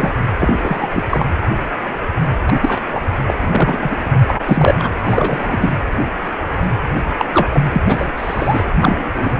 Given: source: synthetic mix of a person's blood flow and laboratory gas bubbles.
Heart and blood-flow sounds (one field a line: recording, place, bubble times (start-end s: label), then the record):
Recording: Doppler ultrasound of blood flow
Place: precordium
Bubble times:
0.00-0.14 s: bubbles
0.39-0.89 s: bubbles
0.93-1.05 s: bubbles
1.09-1.25 s: bubbles
2.46-2.81 s: bubbles
2.88-2.99 s: bubbles
3.28-3.33 s: bubbles
3.41-3.97 s: bubbles
4.28-4.41 s: bubbles
4.45-4.75 s: bubbles
4.79-4.91 s: bubbles
5.04-5.75 s: bubbles
7.17-7.25 s: bubbles
7.33-7.48 s: bubbles
7.53-7.62 s: bubbles
7.72-7.83 s: bubbles
7.87-8.11 s: bubbles
8.17-8.64 s: bubbles
8.79-9.36 s: bubbles
From the record:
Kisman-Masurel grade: 233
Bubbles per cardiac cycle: several, 3 to 8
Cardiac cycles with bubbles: 50 to 99%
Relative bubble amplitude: loud (0.450 to 0.775)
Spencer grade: 3 (all of the cardiac periods contain showers or single bubble signals, but not dominating or overriding the cardiac motion signals)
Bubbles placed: anywhere in the cardiac cycle